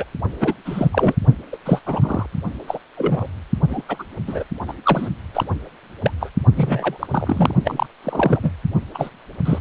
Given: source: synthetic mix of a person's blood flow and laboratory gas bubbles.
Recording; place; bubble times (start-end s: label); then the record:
Doppler ultrasound of blood flow; precordium
0.00-0.04 s: bubbles
0.40-0.54 s: bubbles
0.65-0.89 s: bubbles
0.92-1.15 s: bubbles
1.52-1.58 s: bubbles
1.65-1.81 s: bubbles
1.85-2.26 s: bubbles
2.67-2.79 s: bubbles
2.97-3.27 s: bubbles
3.69-3.82 s: bubbles
3.88-3.97 s: bubbles
3.99-4.03 s: bubbles
4.27-4.44 s: bubbles
4.68-4.74 s: bubbles
4.83-5.09 s: bubbles
5.33-5.44 s: bubbles
6.02-6.11 s: bubbles
6.20-6.32 s: bubbles
6.56-7.07 s: bubbles
7.11-7.54 s: bubbles
7.65-7.87 s: bubbles
8.04-8.51 s: bubbles
8.94-9.09 s: bubbles
9.45-9.59 s: bubbles
From the record:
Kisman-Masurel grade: 243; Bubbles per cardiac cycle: several, 3 to 8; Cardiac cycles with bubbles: 100%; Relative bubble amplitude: loud (0.450 to 0.775); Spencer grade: 3 (all of the cardiac periods contain showers or single bubble signals, but not dominating or overriding the cardiac motion signals); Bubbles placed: only in the low amplitude regions of the cardiac cycle